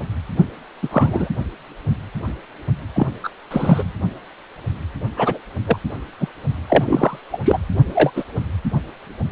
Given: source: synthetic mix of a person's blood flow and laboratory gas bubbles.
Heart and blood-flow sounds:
Doppler ultrasound of blood flow; precordium
0.82-1.30 s: bubbles
2.95-3.07 s: bubbles
3.23-3.29 s: bubbles
3.50-3.92 s: bubbles
5.16-5.39 s: bubbles
5.67-5.77 s: bubbles
6.20-6.27 s: bubbles
6.70-7.19 s: bubbles
7.32-7.38 s: bubbles
7.44-7.58 s: bubbles
7.94-8.11 s: bubbles
8.16-8.25 s: bubbles
From the record:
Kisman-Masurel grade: 233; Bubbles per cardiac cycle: several, 3 to 8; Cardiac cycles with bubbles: 50 to 99%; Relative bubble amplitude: loud (0.450 to 0.775); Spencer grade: 3 (all of the cardiac periods contain showers or single bubble signals, but not dominating or overriding the cardiac motion signals); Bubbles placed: only in the low amplitude regions of the cardiac cycle

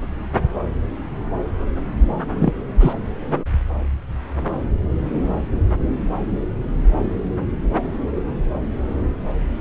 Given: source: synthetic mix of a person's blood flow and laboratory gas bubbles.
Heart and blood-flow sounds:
Doppler ultrasound of blood flow; subclavian vein
2.35-2.51 s: bubbles
2.79-2.93 s: bubbles
From the record:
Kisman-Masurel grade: 213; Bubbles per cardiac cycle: several, 3 to 8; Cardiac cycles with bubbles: 1 to 10%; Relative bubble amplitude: loud (0.450 to 0.775); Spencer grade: 1 (occasional bubble signal discernible with the cardiac motion signal, with majority of cardiac periods free of bubbles); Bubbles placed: anywhere in the cardiac cycle

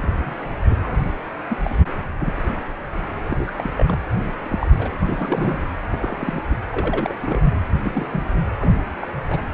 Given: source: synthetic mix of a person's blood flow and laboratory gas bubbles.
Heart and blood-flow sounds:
Doppler ultrasound of blood flow; precordium
0.00-0.35 s: bubbles
0.65-0.78 s: bubbles
0.81-0.97 s: bubbles
1.49-1.58 s: bubbles
1.64-1.74 s: bubbles
2.19-2.34 s: bubbles
2.46-2.52 s: bubbles
3.30-3.52 s: bubbles
3.58-3.70 s: bubbles
3.77-4.00 s: bubbles
4.44-4.67 s: bubbles
4.79-4.89 s: bubbles
4.99-5.67 s: bubbles
5.86-6.41 s: bubbles
6.51-6.56 s: bubbles
6.70-7.12 s: bubbles
7.22-7.42 s: bubbles
7.84-8.07 s: bubbles
8.12-8.23 s: bubbles
8.59-8.73 s: bubbles
9.00-9.08 s: bubbles
9.30-9.42 s: bubbles
From the record:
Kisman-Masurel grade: 242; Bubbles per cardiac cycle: several, 3 to 8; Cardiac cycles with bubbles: 100%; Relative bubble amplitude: moderate (0.250 to 0.450); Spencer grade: 3 (all of the cardiac periods contain showers or single bubble signals, but not dominating or overriding the cardiac motion signals); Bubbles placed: anywhere in the cardiac cycle

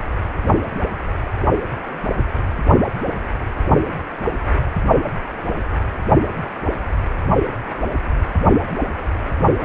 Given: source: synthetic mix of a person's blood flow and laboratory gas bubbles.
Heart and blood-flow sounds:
Doppler ultrasound of blood flow; precordium
9.58-9.65 s: bubbles
From the record:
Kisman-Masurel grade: 211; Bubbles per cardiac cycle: several, 3 to 8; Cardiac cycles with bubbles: 1 to 10%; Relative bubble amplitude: barely perceptible (0.100 to 0.250); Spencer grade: 1 (occasional bubble signal discernible with the cardiac motion signal, with majority of cardiac periods free of bubbles); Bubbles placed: only in the low amplitude regions of the cardiac cycle

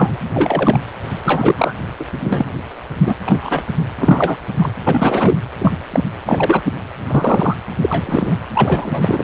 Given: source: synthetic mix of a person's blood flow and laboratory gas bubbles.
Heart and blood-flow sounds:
Doppler ultrasound of blood flow; precordium
0.00-0.17 s: bubbles
0.34-0.84 s: bubbles
1.22-1.73 s: bubbles
1.99-2.05 s: bubbles
2.23-2.45 s: bubbles
3.00-3.13 s: bubbles
3.24-3.62 s: bubbles
3.66-3.74 s: bubbles
3.99-4.37 s: bubbles
4.60-4.75 s: bubbles
4.83-5.39 s: bubbles
5.58-5.78 s: bubbles
5.90-6.04 s: bubbles
6.25-6.62 s: bubbles
7.09-7.57 s: bubbles
7.81-8.37 s: bubbles
8.54-9.24 s: bubbles
From the record:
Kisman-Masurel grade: 233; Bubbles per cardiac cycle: several, 3 to 8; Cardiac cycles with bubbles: 50 to 99%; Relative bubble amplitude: loud (0.450 to 0.775); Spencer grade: 3 (all of the cardiac periods contain showers or single bubble signals, but not dominating or overriding the cardiac motion signals); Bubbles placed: anywhere in the cardiac cycle

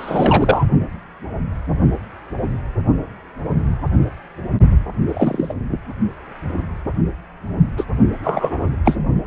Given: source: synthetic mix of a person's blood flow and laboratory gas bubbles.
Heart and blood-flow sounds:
Doppler ultrasound of blood flow; precordium
0.00-0.65 s: bubbles
5.08-5.54 s: bubbles
7.77-7.84 s: bubbles
8.24-8.68 s: bubbles
8.84-8.97 s: bubbles
From the record:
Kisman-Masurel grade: 233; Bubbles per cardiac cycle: several, 3 to 8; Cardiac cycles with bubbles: 50 to 99%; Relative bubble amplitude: loud (0.450 to 0.775); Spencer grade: 3 (all of the cardiac periods contain showers or single bubble signals, but not dominating or overriding the cardiac motion signals); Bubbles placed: only in the low amplitude regions of the cardiac cycle

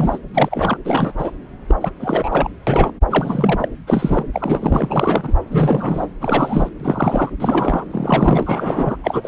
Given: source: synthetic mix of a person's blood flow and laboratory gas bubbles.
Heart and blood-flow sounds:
Doppler ultrasound of blood flow; subclavian vein
0.00-0.19 s: bubbles
0.33-0.77 s: bubbles
0.84-1.12 s: bubbles
1.18-1.31 s: bubbles
1.68-1.76 s: bubbles
1.80-1.91 s: bubbles
1.99-2.49 s: bubbles
2.67-2.92 s: bubbles
3.09-3.68 s: bubbles
3.87-4.26 s: bubbles
4.33-5.33 s: bubbles
5.50-6.06 s: bubbles
6.21-6.69 s: bubbles
6.79-7.29 s: bubbles
7.40-7.85 s: bubbles
7.90-8.96 s: bubbles
9.03-9.28 s: bubbles
From the record:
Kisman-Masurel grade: 343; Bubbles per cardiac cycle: rolling drumbeat, 9 or more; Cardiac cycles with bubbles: 100%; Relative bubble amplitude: loud (0.450 to 0.775); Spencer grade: 3 (all of the cardiac periods contain showers or single bubble signals, but not dominating or overriding the cardiac motion signals); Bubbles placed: anywhere in the cardiac cycle

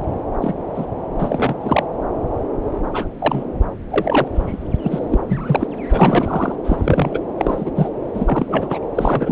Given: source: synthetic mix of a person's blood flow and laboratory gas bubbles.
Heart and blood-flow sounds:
Doppler ultrasound of blood flow; subclavian vein
0.41-0.56 s: bubbles
0.74-0.86 s: bubbles
1.18-1.56 s: bubbles
1.59-1.83 s: bubbles
2.93-3.06 s: bubbles
3.19-3.44 s: bubbles
3.90-4.28 s: bubbles
4.34-4.67 s: bubbles
4.83-4.99 s: bubbles
5.11-5.18 s: bubbles
5.29-5.67 s: bubbles
5.90-6.55 s: bubbles
6.63-7.19 s: bubbles
7.37-7.71 s: bubbles
7.76-7.91 s: bubbles
8.13-8.79 s: bubbles
8.95-9.32 s: bubbles
From the record:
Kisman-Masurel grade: 233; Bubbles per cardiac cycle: several, 3 to 8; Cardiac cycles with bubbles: 50 to 99%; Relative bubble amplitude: loud (0.450 to 0.775); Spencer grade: 3 (all of the cardiac periods contain showers or single bubble signals, but not dominating or overriding the cardiac motion signals); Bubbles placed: anywhere in the cardiac cycle

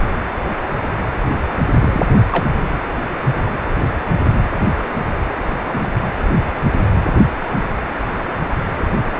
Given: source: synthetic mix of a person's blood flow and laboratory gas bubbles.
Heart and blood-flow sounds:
Doppler ultrasound of blood flow; precordium
1.79-2.06 s: bubbles
2.31-2.46 s: bubbles
3.25-3.47 s: bubbles
5.70-5.89 s: bubbles
From the record:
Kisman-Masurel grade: 122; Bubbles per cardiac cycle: 1 to 2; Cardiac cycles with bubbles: 10 to 50%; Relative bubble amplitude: moderate (0.250 to 0.450); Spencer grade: 2 (many but less than half of the cardiac periods contain bubble signals, singularly or in groups); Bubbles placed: anywhere in the cardiac cycle

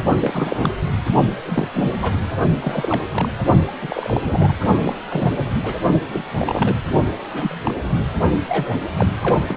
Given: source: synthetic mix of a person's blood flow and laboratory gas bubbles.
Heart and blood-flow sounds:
Doppler ultrasound of blood flow; precordium
0.21-0.72 s: bubbles
1.46-1.68 s: bubbles
1.72-1.90 s: bubbles
2.02-2.14 s: bubbles
2.61-3.01 s: bubbles
3.12-3.29 s: bubbles
3.67-3.71 s: bubbles
3.82-4.57 s: bubbles
4.84-4.96 s: bubbles
5.09-5.30 s: bubbles
5.62-5.75 s: bubbles
6.08-6.23 s: bubbles
6.37-6.75 s: bubbles
7.33-7.58 s: bubbles
7.65-7.73 s: bubbles
8.48-8.74 s: bubbles
8.96-9.06 s: bubbles
9.22-9.40 s: bubbles
9.47-9.57 s: bubbles
From the record:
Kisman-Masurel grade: 242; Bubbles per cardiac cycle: several, 3 to 8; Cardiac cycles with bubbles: 100%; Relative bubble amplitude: moderate (0.250 to 0.450); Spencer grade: 3 (all of the cardiac periods contain showers or single bubble signals, but not dominating or overriding the cardiac motion signals); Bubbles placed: only in the low amplitude regions of the cardiac cycle

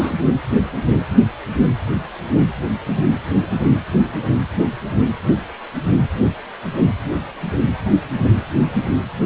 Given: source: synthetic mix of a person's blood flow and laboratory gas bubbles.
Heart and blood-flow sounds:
Doppler ultrasound of blood flow; precordium
0.00-0.11 s: bubbles
From the record:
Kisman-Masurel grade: 111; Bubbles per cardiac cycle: 1 to 2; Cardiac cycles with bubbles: 1 to 10%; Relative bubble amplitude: barely perceptible (0.100 to 0.250); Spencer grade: 1 (occasional bubble signal discernible with the cardiac motion signal, with majority of cardiac periods free of bubbles); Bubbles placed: anywhere in the cardiac cycle

